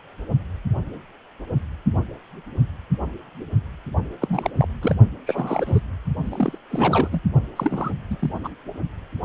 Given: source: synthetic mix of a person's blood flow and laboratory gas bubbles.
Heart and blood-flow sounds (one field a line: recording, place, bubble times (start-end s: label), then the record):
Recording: Doppler ultrasound of blood flow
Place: precordium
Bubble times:
4.21-4.50 s: bubbles
4.56-4.68 s: bubbles
4.81-4.96 s: bubbles
5.26-5.80 s: bubbles
6.24-6.58 s: bubbles
6.70-7.08 s: bubbles
7.12-7.21 s: bubbles
7.56-7.93 s: bubbles
8.10-8.31 s: bubbles
8.44-8.49 s: bubbles
From the record:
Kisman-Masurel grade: 332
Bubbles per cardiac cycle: rolling drumbeat, 9 or more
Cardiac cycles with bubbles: 50 to 99%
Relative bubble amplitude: moderate (0.250 to 0.450)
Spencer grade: 3 (all of the cardiac periods contain showers or single bubble signals, but not dominating or overriding the cardiac motion signals)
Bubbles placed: only in the low amplitude regions of the cardiac cycle